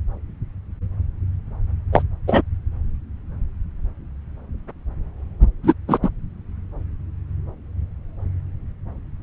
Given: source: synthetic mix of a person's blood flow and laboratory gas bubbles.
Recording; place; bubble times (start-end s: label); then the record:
Doppler ultrasound of blood flow; subclavian vein
1.93-2.02 s: bubbles
2.27-2.42 s: bubbles
5.63-5.74 s: bubbles
5.88-5.98 s: bubbles
6.03-6.10 s: bubbles
From the record:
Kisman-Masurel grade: 213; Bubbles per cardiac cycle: several, 3 to 8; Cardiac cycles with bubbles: 1 to 10%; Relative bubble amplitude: loud (0.450 to 0.775); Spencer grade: 1 (occasional bubble signal discernible with the cardiac motion signal, with majority of cardiac periods free of bubbles); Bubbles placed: anywhere in the cardiac cycle